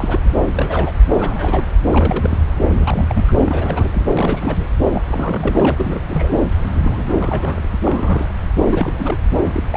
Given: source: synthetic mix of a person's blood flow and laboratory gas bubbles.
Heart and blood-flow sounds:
Doppler ultrasound of blood flow; subclavian vein
0.00-0.20 s: bubbles
0.23-0.30 s: bubbles
0.52-0.93 s: bubbles
1.09-1.66 s: bubbles
1.89-2.41 s: bubbles
2.69-3.33 s: bubbles
3.38-4.05 s: bubbles
4.13-4.66 s: bubbles
4.93-5.01 s: bubbles
5.07-6.01 s: bubbles
6.09-6.36 s: bubbles
6.75-7.67 s: bubbles
7.70-8.33 s: bubbles
8.69-8.94 s: bubbles
8.99-9.20 s: bubbles
9.53-9.64 s: bubbles
9.71-9.77 s: bubbles
From the record:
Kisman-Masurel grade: 342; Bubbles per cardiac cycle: rolling drumbeat, 9 or more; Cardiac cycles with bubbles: 100%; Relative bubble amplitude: moderate (0.250 to 0.450); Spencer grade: 3 (all of the cardiac periods contain showers or single bubble signals, but not dominating or overriding the cardiac motion signals); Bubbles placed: anywhere in the cardiac cycle

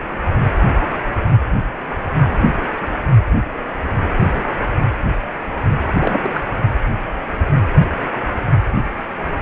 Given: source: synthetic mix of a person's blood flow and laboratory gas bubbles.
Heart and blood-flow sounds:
Doppler ultrasound of blood flow; precordium
6.00-6.28 s: bubbles
6.34-6.42 s: bubbles
From the record:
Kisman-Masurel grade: 223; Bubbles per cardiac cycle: several, 3 to 8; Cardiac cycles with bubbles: 10 to 50%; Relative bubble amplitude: loud (0.450 to 0.775); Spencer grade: 2 (many but less than half of the cardiac periods contain bubble signals, singularly or in groups); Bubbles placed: anywhere in the cardiac cycle

